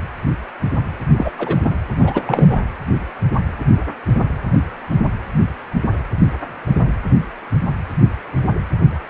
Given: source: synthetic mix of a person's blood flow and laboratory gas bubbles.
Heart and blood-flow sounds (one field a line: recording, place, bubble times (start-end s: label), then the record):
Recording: Doppler ultrasound of blood flow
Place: precordium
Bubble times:
1.15-1.31 s: bubbles
1.38-1.76 s: bubbles
2.00-2.22 s: bubbles
2.25-2.60 s: bubbles
From the record:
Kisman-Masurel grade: 222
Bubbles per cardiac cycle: several, 3 to 8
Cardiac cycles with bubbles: 10 to 50%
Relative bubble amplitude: moderate (0.250 to 0.450)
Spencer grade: 2 (many but less than half of the cardiac periods contain bubble signals, singularly or in groups)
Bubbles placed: anywhere in the cardiac cycle